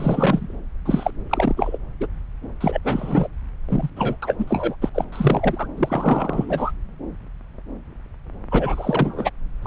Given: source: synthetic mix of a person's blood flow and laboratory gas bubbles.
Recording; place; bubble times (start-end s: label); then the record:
Doppler ultrasound of blood flow; subclavian vein
0.00-0.58 s: bubbles
0.85-1.10 s: bubbles
1.30-1.78 s: bubbles
2.00-2.06 s: bubbles
2.60-2.79 s: bubbles
2.84-3.27 s: bubbles
3.69-3.90 s: bubbles
3.96-4.17 s: bubbles
4.22-4.34 s: bubbles
4.38-4.75 s: bubbles
4.81-4.89 s: bubbles
4.94-5.04 s: bubbles
5.12-5.67 s: bubbles
5.77-6.71 s: bubbles
8.51-9.30 s: bubbles
9.62-9.66 s: bubbles
From the record:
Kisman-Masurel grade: 332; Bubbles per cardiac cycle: rolling drumbeat, 9 or more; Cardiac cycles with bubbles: 50 to 99%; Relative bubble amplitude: moderate (0.250 to 0.450); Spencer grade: 3 (all of the cardiac periods contain showers or single bubble signals, but not dominating or overriding the cardiac motion signals); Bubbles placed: anywhere in the cardiac cycle